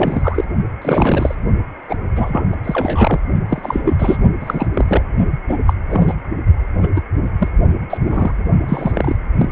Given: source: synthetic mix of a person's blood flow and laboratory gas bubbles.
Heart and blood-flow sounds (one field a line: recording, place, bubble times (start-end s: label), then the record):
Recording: Doppler ultrasound of blood flow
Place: precordium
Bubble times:
0.00-0.44 s: bubbles
0.81-1.35 s: bubbles
1.88-1.97 s: bubbles
2.15-2.44 s: bubbles
2.52-2.56 s: bubbles
2.64-3.20 s: bubbles
3.49-3.82 s: bubbles
3.84-4.17 s: bubbles
4.41-4.67 s: bubbles
4.74-4.85 s: bubbles
4.88-5.03 s: bubbles
5.48-5.58 s: bubbles
5.67-5.73 s: bubbles
5.89-6.15 s: bubbles
6.79-6.89 s: bubbles
6.96-7.00 s: bubbles
7.39-7.48 s: bubbles
7.90-7.98 s: bubbles
8.10-8.33 s: bubbles
8.68-9.16 s: bubbles
9.39-9.49 s: bubbles
From the record:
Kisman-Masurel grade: 243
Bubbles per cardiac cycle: several, 3 to 8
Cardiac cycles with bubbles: 100%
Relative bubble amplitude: loud (0.450 to 0.775)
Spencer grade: 3 (all of the cardiac periods contain showers or single bubble signals, but not dominating or overriding the cardiac motion signals)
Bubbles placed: only in the low amplitude regions of the cardiac cycle